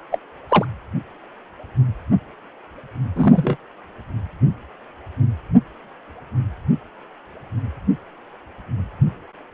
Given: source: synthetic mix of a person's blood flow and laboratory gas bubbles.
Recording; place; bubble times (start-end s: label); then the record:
Doppler ultrasound of blood flow; precordium
0.11-0.18 s: bubbles
0.49-0.66 s: bubbles
3.15-3.56 s: bubbles
From the record:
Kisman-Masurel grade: 123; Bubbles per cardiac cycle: 1 to 2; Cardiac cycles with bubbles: 10 to 50%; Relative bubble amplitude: loud (0.450 to 0.775); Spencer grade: 2 (many but less than half of the cardiac periods contain bubble signals, singularly or in groups); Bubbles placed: anywhere in the cardiac cycle